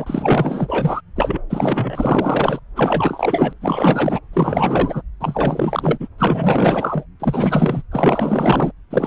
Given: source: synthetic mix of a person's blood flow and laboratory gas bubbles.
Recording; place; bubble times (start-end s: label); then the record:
Doppler ultrasound of blood flow; subclavian vein
0.00-1.01 s: bubbles
1.16-1.42 s: bubbles
1.50-2.59 s: bubbles
2.75-3.53 s: bubbles
3.60-4.20 s: bubbles
4.33-5.02 s: bubbles
5.20-6.08 s: bubbles
6.18-7.05 s: bubbles
7.19-7.83 s: bubbles
7.91-8.71 s: bubbles
8.90-9.07 s: bubbles
From the record:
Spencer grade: 4 (maximum detectable bubble signal sounding continuously throughout systole and diastole of every cardiac period, and overriding the amplitude of the normal cardiac signals); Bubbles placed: anywhere in the cardiac cycle